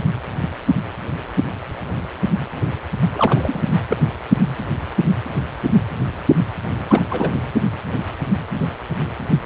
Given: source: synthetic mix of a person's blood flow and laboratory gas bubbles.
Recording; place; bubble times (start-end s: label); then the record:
Doppler ultrasound of blood flow; precordium
3.14-3.63 s: bubbles
3.90-3.96 s: bubbles
6.89-7.02 s: bubbles
7.09-7.41 s: bubbles
7.54-7.60 s: bubbles
From the record:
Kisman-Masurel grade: 212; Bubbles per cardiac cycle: several, 3 to 8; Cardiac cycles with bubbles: 1 to 10%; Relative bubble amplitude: moderate (0.250 to 0.450); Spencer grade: 1 (occasional bubble signal discernible with the cardiac motion signal, with majority of cardiac periods free of bubbles); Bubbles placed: anywhere in the cardiac cycle